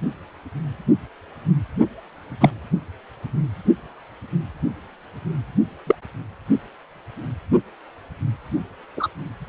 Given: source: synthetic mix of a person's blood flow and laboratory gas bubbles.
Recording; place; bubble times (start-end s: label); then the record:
Doppler ultrasound of blood flow; precordium
2.40-2.50 s: bubbles
5.87-5.95 s: bubbles
8.96-9.08 s: bubbles
From the record:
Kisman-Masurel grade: 123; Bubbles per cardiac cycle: 1 to 2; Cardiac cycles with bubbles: 10 to 50%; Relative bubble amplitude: loud (0.450 to 0.775); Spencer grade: 2 (many but less than half of the cardiac periods contain bubble signals, singularly or in groups); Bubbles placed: only in the low amplitude regions of the cardiac cycle